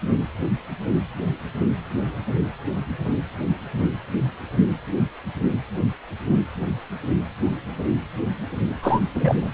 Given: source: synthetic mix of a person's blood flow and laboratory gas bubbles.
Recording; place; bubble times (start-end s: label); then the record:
Doppler ultrasound of blood flow; precordium
8.82-9.00 s: bubbles
9.14-9.48 s: bubbles
From the record:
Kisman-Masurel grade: 223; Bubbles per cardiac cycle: several, 3 to 8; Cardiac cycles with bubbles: 10 to 50%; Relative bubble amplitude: loud (0.450 to 0.775); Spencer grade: 2 (many but less than half of the cardiac periods contain bubble signals, singularly or in groups); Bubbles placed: only in the low amplitude regions of the cardiac cycle